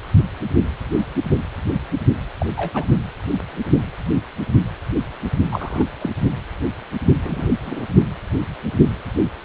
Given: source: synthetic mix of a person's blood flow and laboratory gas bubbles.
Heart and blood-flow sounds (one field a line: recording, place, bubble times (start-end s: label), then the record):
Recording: Doppler ultrasound of blood flow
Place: precordium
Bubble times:
2.38-2.46 s: bubbles
2.56-2.71 s: bubbles
2.74-2.84 s: bubbles
5.52-5.87 s: bubbles
6.01-6.10 s: bubbles
7.25-7.49 s: bubbles
7.62-7.86 s: bubbles
From the record:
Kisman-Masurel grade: 222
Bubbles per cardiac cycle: several, 3 to 8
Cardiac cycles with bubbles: 10 to 50%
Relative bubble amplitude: moderate (0.250 to 0.450)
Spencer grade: 2 (many but less than half of the cardiac periods contain bubble signals, singularly or in groups)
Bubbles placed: only in the low amplitude regions of the cardiac cycle